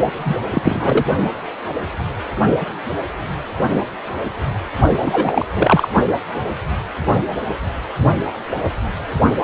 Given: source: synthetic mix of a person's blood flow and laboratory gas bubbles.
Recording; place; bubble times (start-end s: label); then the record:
Doppler ultrasound of blood flow; precordium
0.15-0.35 s: bubbles
0.52-1.05 s: bubbles
5.02-5.46 s: bubbles
5.54-5.88 s: bubbles
From the record:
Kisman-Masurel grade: 223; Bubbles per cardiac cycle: several, 3 to 8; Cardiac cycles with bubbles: 10 to 50%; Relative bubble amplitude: loud (0.450 to 0.775); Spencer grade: 2 (many but less than half of the cardiac periods contain bubble signals, singularly or in groups); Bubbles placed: only in the low amplitude regions of the cardiac cycle